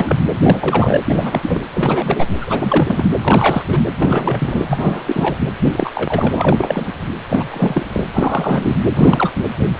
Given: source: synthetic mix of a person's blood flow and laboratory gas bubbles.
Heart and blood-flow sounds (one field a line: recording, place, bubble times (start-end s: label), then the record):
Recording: Doppler ultrasound of blood flow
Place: precordium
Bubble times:
0.00-0.17 s: bubbles
0.45-1.00 s: bubbles
1.05-1.64 s: bubbles
1.73-2.26 s: bubbles
2.41-3.05 s: bubbles
3.21-3.64 s: bubbles
3.68-3.85 s: bubbles
3.97-4.64 s: bubbles
4.67-5.36 s: bubbles
5.59-5.90 s: bubbles
5.94-6.92 s: bubbles
7.29-7.46 s: bubbles
7.50-7.86 s: bubbles
7.92-8.04 s: bubbles
8.13-8.76 s: bubbles
8.95-9.31 s: bubbles
From the record:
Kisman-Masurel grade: 342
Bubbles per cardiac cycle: rolling drumbeat, 9 or more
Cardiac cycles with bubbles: 100%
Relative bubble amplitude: moderate (0.250 to 0.450)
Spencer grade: 3 (all of the cardiac periods contain showers or single bubble signals, but not dominating or overriding the cardiac motion signals)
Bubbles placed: anywhere in the cardiac cycle